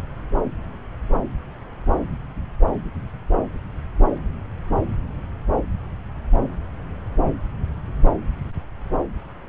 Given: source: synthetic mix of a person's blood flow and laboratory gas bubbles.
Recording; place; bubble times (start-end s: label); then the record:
Doppler ultrasound of blood flow; subclavian vein
no bubbles
From the record:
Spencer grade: 0 (complete lack of bubble signals)